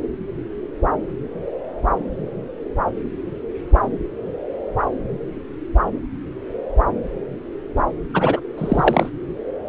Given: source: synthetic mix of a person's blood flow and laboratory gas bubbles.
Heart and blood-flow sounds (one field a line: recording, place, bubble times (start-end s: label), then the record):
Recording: Doppler ultrasound of blood flow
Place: subclavian vein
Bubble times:
8.13-8.40 s: bubbles
8.57-9.09 s: bubbles
From the record:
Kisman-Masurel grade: 223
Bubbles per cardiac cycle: several, 3 to 8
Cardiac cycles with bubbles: 10 to 50%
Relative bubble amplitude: loud (0.450 to 0.775)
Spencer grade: 2 (many but less than half of the cardiac periods contain bubble signals, singularly or in groups)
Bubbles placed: anywhere in the cardiac cycle